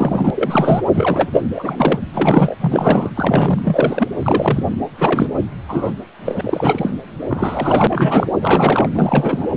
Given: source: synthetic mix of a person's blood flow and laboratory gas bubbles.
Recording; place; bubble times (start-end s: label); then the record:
Doppler ultrasound of blood flow; precordium
0.00-0.30 s: bubbles
0.35-0.82 s: bubbles
0.94-1.29 s: bubbles
1.32-1.42 s: bubbles
1.55-1.99 s: bubbles
2.13-2.56 s: bubbles
2.61-3.10 s: bubbles
3.15-4.08 s: bubbles
4.23-4.66 s: bubbles
4.98-5.27 s: bubbles
5.69-5.93 s: bubbles
6.25-6.90 s: bubbles
7.29-8.29 s: bubbles
8.41-8.89 s: bubbles
8.95-9.49 s: bubbles
From the record:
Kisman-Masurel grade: 343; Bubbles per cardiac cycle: rolling drumbeat, 9 or more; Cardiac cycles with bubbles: 100%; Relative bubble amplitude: loud (0.450 to 0.775); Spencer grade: 3 (all of the cardiac periods contain showers or single bubble signals, but not dominating or overriding the cardiac motion signals); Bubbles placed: anywhere in the cardiac cycle